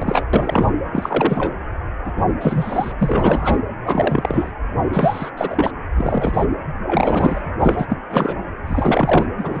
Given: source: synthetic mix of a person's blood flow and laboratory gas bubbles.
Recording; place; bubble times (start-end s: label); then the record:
Doppler ultrasound of blood flow; precordium
0.00-0.25 s: bubbles
0.33-0.70 s: bubbles
0.93-1.55 s: bubbles
2.04-2.12 s: bubbles
2.17-2.24 s: bubbles
2.41-2.95 s: bubbles
2.98-3.58 s: bubbles
3.83-4.52 s: bubbles
4.92-5.29 s: bubbles
5.37-5.71 s: bubbles
5.96-6.45 s: bubbles
6.87-7.42 s: bubbles
7.60-7.86 s: bubbles
7.88-7.98 s: bubbles
8.10-8.35 s: bubbles
8.67-9.27 s: bubbles
9.38-9.60 s: bubbles
From the record:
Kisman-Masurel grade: 343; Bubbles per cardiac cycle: rolling drumbeat, 9 or more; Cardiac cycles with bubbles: 100%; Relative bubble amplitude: loud (0.450 to 0.775); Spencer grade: 3 (all of the cardiac periods contain showers or single bubble signals, but not dominating or overriding the cardiac motion signals); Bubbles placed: anywhere in the cardiac cycle